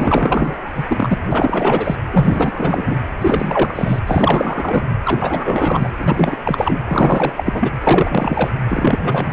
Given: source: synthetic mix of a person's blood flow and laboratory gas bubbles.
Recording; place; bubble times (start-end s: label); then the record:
Doppler ultrasound of blood flow; precordium
0.00-0.69 s: bubbles
0.75-1.18 s: bubbles
1.31-1.96 s: bubbles
2.11-2.96 s: bubbles
3.21-3.99 s: bubbles
4.07-4.86 s: bubbles
5.05-5.89 s: bubbles
5.98-6.37 s: bubbles
6.45-6.80 s: bubbles
6.88-7.33 s: bubbles
7.37-7.71 s: bubbles
7.83-8.50 s: bubbles
8.68-9.33 s: bubbles
From the record:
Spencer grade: 4 (maximum detectable bubble signal sounding continuously throughout systole and diastole of every cardiac period, and overriding the amplitude of the normal cardiac signals); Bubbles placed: anywhere in the cardiac cycle